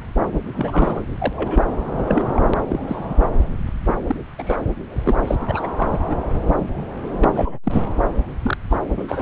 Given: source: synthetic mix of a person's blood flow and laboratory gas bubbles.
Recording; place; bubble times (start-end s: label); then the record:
Doppler ultrasound of blood flow; subclavian vein
0.53-1.03 s: bubbles
1.19-1.33 s: bubbles
1.36-1.63 s: bubbles
1.92-2.23 s: bubbles
2.35-2.42 s: bubbles
2.68-2.79 s: bubbles
2.86-3.20 s: bubbles
4.07-4.16 s: bubbles
4.39-4.57 s: bubbles
5.04-5.15 s: bubbles
5.27-5.36 s: bubbles
5.48-5.68 s: bubbles
5.77-6.00 s: bubbles
6.10-6.16 s: bubbles
7.20-7.59 s: bubbles
7.63-7.82 s: bubbles
8.43-8.57 s: bubbles
8.70-8.77 s: bubbles
8.96-9.21 s: bubbles
From the record:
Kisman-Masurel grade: 232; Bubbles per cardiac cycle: several, 3 to 8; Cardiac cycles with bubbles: 50 to 99%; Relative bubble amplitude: moderate (0.250 to 0.450); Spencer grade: 3 (all of the cardiac periods contain showers or single bubble signals, but not dominating or overriding the cardiac motion signals); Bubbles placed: anywhere in the cardiac cycle